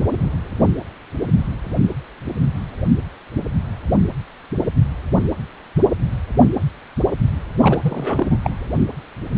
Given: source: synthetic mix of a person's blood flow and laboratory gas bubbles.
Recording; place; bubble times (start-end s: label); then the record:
Doppler ultrasound of blood flow; precordium
7.60-7.78 s: bubbles
7.83-8.27 s: bubbles
8.30-8.38 s: bubbles
8.44-8.50 s: bubbles
From the record:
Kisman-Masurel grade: 222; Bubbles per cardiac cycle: several, 3 to 8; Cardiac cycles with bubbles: 10 to 50%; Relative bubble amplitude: moderate (0.250 to 0.450); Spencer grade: 2 (many but less than half of the cardiac periods contain bubble signals, singularly or in groups); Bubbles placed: anywhere in the cardiac cycle